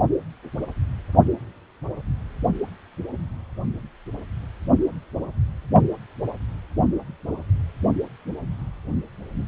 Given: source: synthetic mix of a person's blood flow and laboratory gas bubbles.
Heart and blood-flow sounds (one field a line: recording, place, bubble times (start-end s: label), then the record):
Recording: Doppler ultrasound of blood flow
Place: precordium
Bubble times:
no bubbles
From the record:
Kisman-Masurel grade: 000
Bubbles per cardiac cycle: 0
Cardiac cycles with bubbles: 0%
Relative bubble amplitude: no bubbles discernible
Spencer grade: 0 (complete lack of bubble signals)